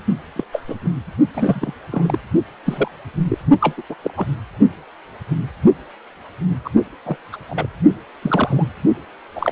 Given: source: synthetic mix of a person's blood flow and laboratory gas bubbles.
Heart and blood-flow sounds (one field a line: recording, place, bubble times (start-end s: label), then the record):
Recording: Doppler ultrasound of blood flow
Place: precordium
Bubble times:
0.36-0.44 s: bubbles
0.52-0.62 s: bubbles
0.68-0.75 s: bubbles
0.84-0.90 s: bubbles
1.33-1.74 s: bubbles
1.91-2.18 s: bubbles
2.65-2.88 s: bubbles
3.29-3.38 s: bubbles
3.60-3.73 s: bubbles
3.77-3.82 s: bubbles
3.89-3.96 s: bubbles
4.03-4.11 s: bubbles
4.17-4.27 s: bubbles
6.65-6.70 s: bubbles
7.06-7.17 s: bubbles
7.32-7.37 s: bubbles
7.49-7.67 s: bubbles
8.21-8.66 s: bubbles
9.35-9.52 s: bubbles
From the record:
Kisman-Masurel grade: 232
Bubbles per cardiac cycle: several, 3 to 8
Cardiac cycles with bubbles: 50 to 99%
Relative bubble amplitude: moderate (0.250 to 0.450)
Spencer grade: 3 (all of the cardiac periods contain showers or single bubble signals, but not dominating or overriding the cardiac motion signals)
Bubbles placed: only in the low amplitude regions of the cardiac cycle